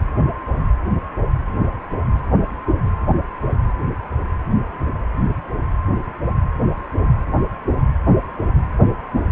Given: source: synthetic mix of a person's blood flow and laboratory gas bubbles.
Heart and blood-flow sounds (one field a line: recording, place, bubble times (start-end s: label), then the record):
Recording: Doppler ultrasound of blood flow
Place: precordium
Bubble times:
no bubbles
From the record:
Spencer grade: 0 (complete lack of bubble signals)